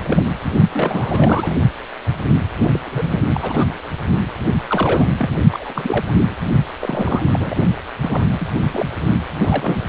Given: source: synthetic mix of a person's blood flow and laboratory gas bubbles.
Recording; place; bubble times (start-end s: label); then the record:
Doppler ultrasound of blood flow; precordium
0.03-0.22 s: bubbles
0.44-0.49 s: bubbles
0.73-1.55 s: bubbles
2.60-2.82 s: bubbles
2.85-3.21 s: bubbles
3.34-3.68 s: bubbles
4.67-5.09 s: bubbles
5.17-5.30 s: bubbles
5.50-6.35 s: bubbles
6.80-7.22 s: bubbles
7.33-7.54 s: bubbles
8.02-8.25 s: bubbles
8.32-8.47 s: bubbles
8.71-8.90 s: bubbles
9.37-9.89 s: bubbles
From the record:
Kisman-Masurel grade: 342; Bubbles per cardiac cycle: rolling drumbeat, 9 or more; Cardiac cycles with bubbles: 100%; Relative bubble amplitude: moderate (0.250 to 0.450); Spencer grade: 3 (all of the cardiac periods contain showers or single bubble signals, but not dominating or overriding the cardiac motion signals); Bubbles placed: only in the low amplitude regions of the cardiac cycle